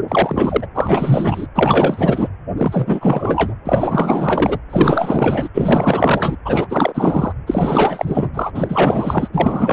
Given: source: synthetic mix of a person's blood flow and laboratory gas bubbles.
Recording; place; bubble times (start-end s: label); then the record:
Doppler ultrasound of blood flow; precordium
0.00-0.03 s: bubbles
0.08-0.66 s: bubbles
0.75-1.47 s: bubbles
1.55-2.29 s: bubbles
2.57-3.54 s: bubbles
3.64-4.58 s: bubbles
4.70-5.49 s: bubbles
5.54-6.37 s: bubbles
6.45-7.33 s: bubbles
7.46-8.29 s: bubbles
8.34-8.51 s: bubbles
8.54-9.28 s: bubbles
9.32-9.73 s: bubbles
From the record:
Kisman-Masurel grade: 444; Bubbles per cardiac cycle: continuous sound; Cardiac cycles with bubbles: 100%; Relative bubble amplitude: maximal (0.775 to 0.999); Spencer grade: 4 (maximum detectable bubble signal sounding continuously throughout systole and diastole of every cardiac period, and overriding the amplitude of the normal cardiac signals); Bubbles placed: anywhere in the cardiac cycle